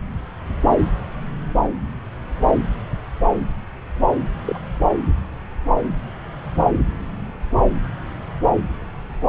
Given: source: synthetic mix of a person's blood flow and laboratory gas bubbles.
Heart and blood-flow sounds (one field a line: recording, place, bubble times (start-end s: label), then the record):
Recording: Doppler ultrasound of blood flow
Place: subclavian vein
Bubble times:
4.45-4.60 s: bubbles
From the record:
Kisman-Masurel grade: 111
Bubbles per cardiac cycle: 1 to 2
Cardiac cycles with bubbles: 1 to 10%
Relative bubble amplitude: barely perceptible (0.100 to 0.250)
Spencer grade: 1 (occasional bubble signal discernible with the cardiac motion signal, with majority of cardiac periods free of bubbles)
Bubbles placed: anywhere in the cardiac cycle